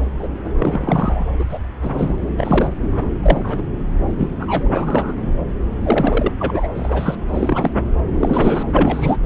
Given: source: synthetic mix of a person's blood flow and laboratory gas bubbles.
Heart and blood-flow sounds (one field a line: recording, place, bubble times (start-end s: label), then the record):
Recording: Doppler ultrasound of blood flow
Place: subclavian vein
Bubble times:
0.19-0.27 s: bubbles
0.58-1.27 s: bubbles
1.39-1.45 s: bubbles
1.50-1.59 s: bubbles
1.82-2.15 s: bubbles
2.38-2.70 s: bubbles
2.92-3.09 s: bubbles
3.22-3.63 s: bubbles
4.17-4.31 s: bubbles
4.41-4.69 s: bubbles
4.74-5.16 s: bubbles
5.23-5.33 s: bubbles
5.83-6.32 s: bubbles
6.39-6.68 s: bubbles
6.75-7.16 s: bubbles
7.28-7.71 s: bubbles
8.20-8.63 s: bubbles
8.74-9.17 s: bubbles
From the record:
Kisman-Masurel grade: 242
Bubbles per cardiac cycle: several, 3 to 8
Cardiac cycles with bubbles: 100%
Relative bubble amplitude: moderate (0.250 to 0.450)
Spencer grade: 3 (all of the cardiac periods contain showers or single bubble signals, but not dominating or overriding the cardiac motion signals)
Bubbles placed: anywhere in the cardiac cycle